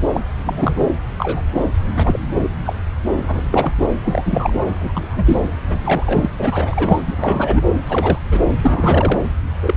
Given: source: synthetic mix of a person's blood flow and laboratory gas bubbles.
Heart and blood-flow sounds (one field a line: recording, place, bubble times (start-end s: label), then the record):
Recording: Doppler ultrasound of blood flow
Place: subclavian vein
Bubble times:
0.14-0.20 s: bubbles
0.44-0.89 s: bubbles
1.18-1.42 s: bubbles
1.56-1.65 s: bubbles
1.95-2.19 s: bubbles
2.35-2.49 s: bubbles
2.65-2.73 s: bubbles
3.16-3.75 s: bubbles
3.80-3.88 s: bubbles
4.05-4.22 s: bubbles
4.25-4.66 s: bubbles
4.80-5.42 s: bubbles
5.68-6.30 s: bubbles
6.38-7.03 s: bubbles
7.07-7.62 s: bubbles
7.85-8.18 s: bubbles
8.31-8.39 s: bubbles
8.61-9.20 s: bubbles
9.62-9.74 s: bubbles
From the record:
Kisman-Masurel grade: 243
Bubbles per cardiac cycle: several, 3 to 8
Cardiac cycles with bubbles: 100%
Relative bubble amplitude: loud (0.450 to 0.775)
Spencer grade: 3 (all of the cardiac periods contain showers or single bubble signals, but not dominating or overriding the cardiac motion signals)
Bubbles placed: anywhere in the cardiac cycle